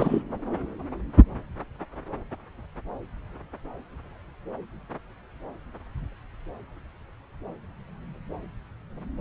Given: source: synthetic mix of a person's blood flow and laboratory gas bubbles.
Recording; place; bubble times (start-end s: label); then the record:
Doppler ultrasound of blood flow; subclavian vein
0.00-0.23 s: bubbles
From the record:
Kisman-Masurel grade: 212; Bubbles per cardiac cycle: several, 3 to 8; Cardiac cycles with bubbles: 1 to 10%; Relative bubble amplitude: moderate (0.250 to 0.450); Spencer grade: 1 (occasional bubble signal discernible with the cardiac motion signal, with majority of cardiac periods free of bubbles); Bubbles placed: anywhere in the cardiac cycle